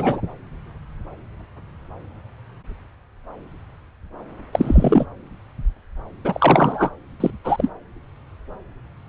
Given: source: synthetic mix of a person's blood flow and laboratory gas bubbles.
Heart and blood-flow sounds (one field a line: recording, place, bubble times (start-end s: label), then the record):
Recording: Doppler ultrasound of blood flow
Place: subclavian vein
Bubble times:
0.00-0.21 s: bubbles
4.53-5.06 s: bubbles
6.25-6.90 s: bubbles
7.20-7.31 s: bubbles
7.44-7.70 s: bubbles
From the record:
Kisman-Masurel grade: 223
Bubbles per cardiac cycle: several, 3 to 8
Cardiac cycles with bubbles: 10 to 50%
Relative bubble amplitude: loud (0.450 to 0.775)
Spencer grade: 2 (many but less than half of the cardiac periods contain bubble signals, singularly or in groups)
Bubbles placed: anywhere in the cardiac cycle